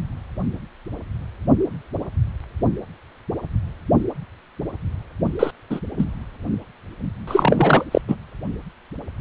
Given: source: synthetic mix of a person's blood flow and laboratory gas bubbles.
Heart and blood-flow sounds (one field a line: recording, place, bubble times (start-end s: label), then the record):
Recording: Doppler ultrasound of blood flow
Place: precordium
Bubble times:
5.39-5.51 s: bubbles
5.70-5.80 s: bubbles
5.98-6.05 s: bubbles
7.27-7.84 s: bubbles
7.91-8.01 s: bubbles
8.08-8.15 s: bubbles
From the record:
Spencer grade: 2 (many but less than half of the cardiac periods contain bubble signals, singularly or in groups)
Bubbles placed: anywhere in the cardiac cycle